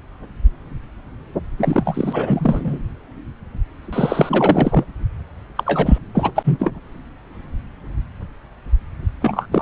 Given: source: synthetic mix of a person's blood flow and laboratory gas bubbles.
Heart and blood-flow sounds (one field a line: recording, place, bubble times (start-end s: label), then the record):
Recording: Doppler ultrasound of blood flow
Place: subclavian vein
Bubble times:
1.57-2.79 s: bubbles
3.92-4.84 s: bubbles
5.55-5.99 s: bubbles
6.15-6.32 s: bubbles
6.35-6.80 s: bubbles
9.21-9.46 s: bubbles
9.52-9.62 s: bubbles
From the record:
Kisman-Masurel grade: 333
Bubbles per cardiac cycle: rolling drumbeat, 9 or more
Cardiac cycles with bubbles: 50 to 99%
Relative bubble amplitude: loud (0.450 to 0.775)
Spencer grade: 3 (all of the cardiac periods contain showers or single bubble signals, but not dominating or overriding the cardiac motion signals)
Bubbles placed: anywhere in the cardiac cycle